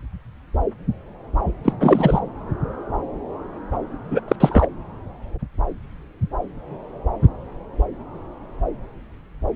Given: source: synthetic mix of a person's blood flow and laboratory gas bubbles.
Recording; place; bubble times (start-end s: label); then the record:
Doppler ultrasound of blood flow; subclavian vein
1.64-1.73 s: bubbles
1.80-2.19 s: bubbles
4.11-4.21 s: bubbles
4.28-4.36 s: bubbles
4.40-4.67 s: bubbles
From the record:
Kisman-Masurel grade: 223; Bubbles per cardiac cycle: several, 3 to 8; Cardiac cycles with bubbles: 10 to 50%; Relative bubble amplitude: loud (0.450 to 0.775); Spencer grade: 2 (many but less than half of the cardiac periods contain bubble signals, singularly or in groups); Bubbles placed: anywhere in the cardiac cycle